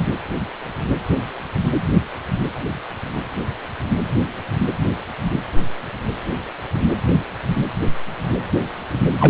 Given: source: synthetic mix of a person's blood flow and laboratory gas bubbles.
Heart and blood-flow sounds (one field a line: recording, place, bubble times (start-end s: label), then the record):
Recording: Doppler ultrasound of blood flow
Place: precordium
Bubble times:
9.20-9.30 s: bubbles
From the record:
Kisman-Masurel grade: 213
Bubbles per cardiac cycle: several, 3 to 8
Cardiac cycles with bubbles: 1 to 10%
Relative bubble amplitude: loud (0.450 to 0.775)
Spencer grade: 1 (occasional bubble signal discernible with the cardiac motion signal, with majority of cardiac periods free of bubbles)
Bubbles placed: anywhere in the cardiac cycle